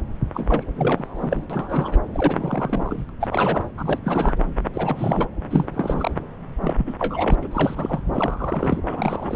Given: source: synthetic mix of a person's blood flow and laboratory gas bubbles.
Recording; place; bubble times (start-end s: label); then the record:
Doppler ultrasound of blood flow; subclavian vein
0.34-0.64 s: bubbles
0.77-1.47 s: bubbles
1.50-1.97 s: bubbles
2.13-3.05 s: bubbles
3.09-3.12 s: bubbles
3.20-3.28 s: bubbles
3.30-3.70 s: bubbles
3.77-4.00 s: bubbles
4.04-4.42 s: bubbles
4.73-5.27 s: bubbles
5.50-5.65 s: bubbles
5.73-6.12 s: bubbles
6.61-6.94 s: bubbles
6.98-7.35 s: bubbles
7.42-7.48 s: bubbles
7.51-8.00 s: bubbles
8.13-8.81 s: bubbles
8.88-9.36 s: bubbles
From the record:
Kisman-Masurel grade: 342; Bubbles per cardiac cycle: rolling drumbeat, 9 or more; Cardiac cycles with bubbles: 100%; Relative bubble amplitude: moderate (0.250 to 0.450); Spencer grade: 3 (all of the cardiac periods contain showers or single bubble signals, but not dominating or overriding the cardiac motion signals); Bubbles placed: anywhere in the cardiac cycle